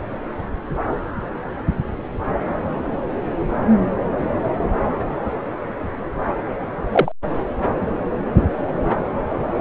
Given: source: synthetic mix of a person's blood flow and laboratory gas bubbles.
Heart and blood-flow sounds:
Doppler ultrasound of blood flow; subclavian vein
6.92-7.12 s: bubbles
From the record:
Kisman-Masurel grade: 113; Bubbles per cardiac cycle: 1 to 2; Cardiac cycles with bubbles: 1 to 10%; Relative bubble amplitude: loud (0.450 to 0.775); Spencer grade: 1 (occasional bubble signal discernible with the cardiac motion signal, with majority of cardiac periods free of bubbles); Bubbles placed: anywhere in the cardiac cycle

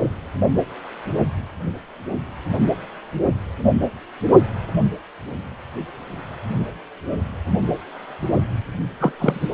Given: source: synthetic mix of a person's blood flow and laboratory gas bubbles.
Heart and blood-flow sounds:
Doppler ultrasound of blood flow; precordium
9.00-9.12 s: bubbles
9.19-9.48 s: bubbles
From the record:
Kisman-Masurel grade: 222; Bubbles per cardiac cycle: several, 3 to 8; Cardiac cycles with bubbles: 10 to 50%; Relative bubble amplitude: moderate (0.250 to 0.450); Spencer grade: 2 (many but less than half of the cardiac periods contain bubble signals, singularly or in groups); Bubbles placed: only in the low amplitude regions of the cardiac cycle

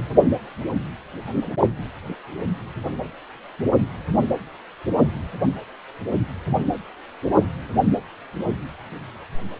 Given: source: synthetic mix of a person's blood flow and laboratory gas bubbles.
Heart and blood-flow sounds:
Doppler ultrasound of blood flow; precordium
no bubbles
From the record:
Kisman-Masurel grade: 000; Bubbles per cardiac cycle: 0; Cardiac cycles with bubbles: 0%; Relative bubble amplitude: no bubbles discernible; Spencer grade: 0 (complete lack of bubble signals)

